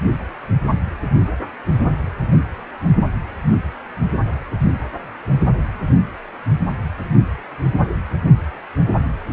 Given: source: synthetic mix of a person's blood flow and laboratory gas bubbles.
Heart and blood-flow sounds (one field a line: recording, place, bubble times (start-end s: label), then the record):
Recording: Doppler ultrasound of blood flow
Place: precordium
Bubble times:
no bubbles
From the record:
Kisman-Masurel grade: 000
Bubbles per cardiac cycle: 0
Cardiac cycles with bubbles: 0%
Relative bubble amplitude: no bubbles discernible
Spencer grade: 0 (complete lack of bubble signals)